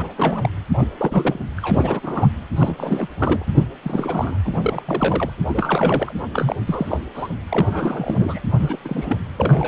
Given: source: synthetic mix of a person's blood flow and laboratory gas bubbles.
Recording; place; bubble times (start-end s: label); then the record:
Doppler ultrasound of blood flow; precordium
0.00-0.13 s: bubbles
0.17-0.49 s: bubbles
0.73-0.88 s: bubbles
0.97-1.50 s: bubbles
1.57-2.29 s: bubbles
2.56-3.07 s: bubbles
3.19-3.44 s: bubbles
3.54-3.65 s: bubbles
3.82-4.37 s: bubbles
4.44-4.83 s: bubbles
4.86-5.30 s: bubbles
5.48-6.12 s: bubbles
6.33-6.56 s: bubbles
6.67-6.98 s: bubbles
7.14-7.28 s: bubbles
7.50-8.41 s: bubbles
8.59-8.77 s: bubbles
8.85-9.17 s: bubbles
9.36-9.68 s: bubbles
From the record:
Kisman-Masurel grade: 342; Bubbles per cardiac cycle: rolling drumbeat, 9 or more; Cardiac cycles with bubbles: 100%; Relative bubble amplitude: moderate (0.250 to 0.450); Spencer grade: 3 (all of the cardiac periods contain showers or single bubble signals, but not dominating or overriding the cardiac motion signals); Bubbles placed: anywhere in the cardiac cycle